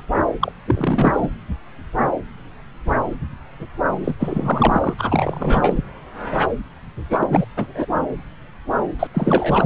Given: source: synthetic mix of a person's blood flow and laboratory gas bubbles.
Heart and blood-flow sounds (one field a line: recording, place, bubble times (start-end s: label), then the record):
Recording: Doppler ultrasound of blood flow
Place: subclavian vein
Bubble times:
0.00-0.03 s: bubbles
0.40-0.52 s: bubbles
0.67-1.27 s: bubbles
4.04-4.14 s: bubbles
4.19-4.94 s: bubbles
4.98-5.82 s: bubbles
7.10-7.45 s: bubbles
7.57-7.86 s: bubbles
8.99-9.07 s: bubbles
9.14-9.66 s: bubbles
From the record:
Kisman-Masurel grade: 333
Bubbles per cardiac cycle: rolling drumbeat, 9 or more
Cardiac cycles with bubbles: 50 to 99%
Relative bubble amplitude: loud (0.450 to 0.775)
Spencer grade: 3 (all of the cardiac periods contain showers or single bubble signals, but not dominating or overriding the cardiac motion signals)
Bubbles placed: anywhere in the cardiac cycle